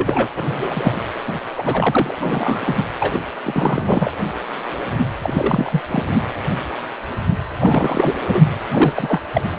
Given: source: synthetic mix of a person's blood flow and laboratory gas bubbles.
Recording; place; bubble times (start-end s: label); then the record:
Doppler ultrasound of blood flow; precordium
0.00-0.30 s: bubbles
0.36-1.01 s: bubbles
1.27-1.32 s: bubbles
1.56-2.74 s: bubbles
3.00-3.19 s: bubbles
3.43-4.11 s: bubbles
5.22-5.81 s: bubbles
5.90-6.05 s: bubbles
7.60-8.15 s: bubbles
8.33-8.41 s: bubbles
8.71-8.93 s: bubbles
8.96-9.21 s: bubbles
9.35-9.49 s: bubbles
From the record:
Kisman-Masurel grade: 332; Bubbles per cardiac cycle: rolling drumbeat, 9 or more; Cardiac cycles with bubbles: 50 to 99%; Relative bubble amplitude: moderate (0.250 to 0.450); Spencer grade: 3 (all of the cardiac periods contain showers or single bubble signals, but not dominating or overriding the cardiac motion signals); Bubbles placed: anywhere in the cardiac cycle